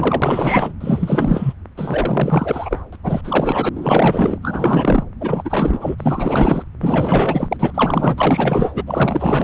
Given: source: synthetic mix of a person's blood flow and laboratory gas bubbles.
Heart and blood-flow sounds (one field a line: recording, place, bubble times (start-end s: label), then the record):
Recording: Doppler ultrasound of blood flow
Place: subclavian vein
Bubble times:
0.00-0.73 s: bubbles
0.80-1.53 s: bubbles
1.77-2.81 s: bubbles
2.92-2.97 s: bubbles
3.03-3.21 s: bubbles
3.23-3.69 s: bubbles
3.75-4.38 s: bubbles
4.42-5.04 s: bubbles
5.20-6.63 s: bubbles
6.80-7.48 s: bubbles
7.51-7.56 s: bubbles
7.59-8.84 s: bubbles
8.87-9.44 s: bubbles
From the record:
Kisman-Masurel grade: 444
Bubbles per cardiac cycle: continuous sound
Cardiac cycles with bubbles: 100%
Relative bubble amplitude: maximal (0.775 to 0.999)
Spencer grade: 4 (maximum detectable bubble signal sounding continuously throughout systole and diastole of every cardiac period, and overriding the amplitude of the normal cardiac signals)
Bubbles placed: anywhere in the cardiac cycle